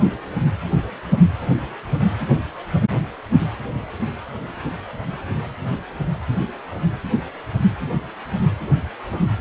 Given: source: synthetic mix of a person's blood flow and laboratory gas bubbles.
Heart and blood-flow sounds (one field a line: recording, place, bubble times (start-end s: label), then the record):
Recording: Doppler ultrasound of blood flow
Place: precordium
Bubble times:
no bubbles
From the record:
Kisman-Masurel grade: 000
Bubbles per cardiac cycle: 0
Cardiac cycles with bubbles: 0%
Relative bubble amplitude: no bubbles discernible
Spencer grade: 0 (complete lack of bubble signals)